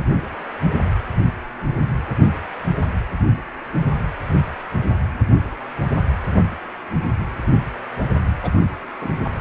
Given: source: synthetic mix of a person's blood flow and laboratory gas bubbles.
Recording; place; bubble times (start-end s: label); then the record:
Doppler ultrasound of blood flow; precordium
8.43-8.51 s: bubbles
9.01-9.08 s: bubbles
From the record:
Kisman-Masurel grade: 111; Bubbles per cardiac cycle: 1 to 2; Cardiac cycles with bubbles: 1 to 10%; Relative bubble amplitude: barely perceptible (0.100 to 0.250); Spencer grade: 1 (occasional bubble signal discernible with the cardiac motion signal, with majority of cardiac periods free of bubbles); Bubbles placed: anywhere in the cardiac cycle